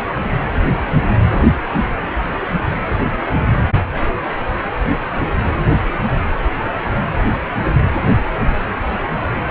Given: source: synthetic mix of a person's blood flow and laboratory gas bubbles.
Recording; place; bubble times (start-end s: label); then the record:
Doppler ultrasound of blood flow; precordium
no bubbles
From the record:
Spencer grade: 0 (complete lack of bubble signals)